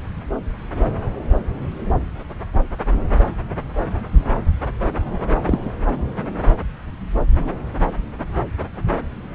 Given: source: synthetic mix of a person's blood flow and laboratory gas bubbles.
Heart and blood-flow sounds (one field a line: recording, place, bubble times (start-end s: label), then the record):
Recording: Doppler ultrasound of blood flow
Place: subclavian vein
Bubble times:
5.43-5.71 s: bubbles
From the record:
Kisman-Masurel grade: 112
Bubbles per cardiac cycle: 1 to 2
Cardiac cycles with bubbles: 1 to 10%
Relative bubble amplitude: moderate (0.250 to 0.450)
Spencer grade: 1 (occasional bubble signal discernible with the cardiac motion signal, with majority of cardiac periods free of bubbles)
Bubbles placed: anywhere in the cardiac cycle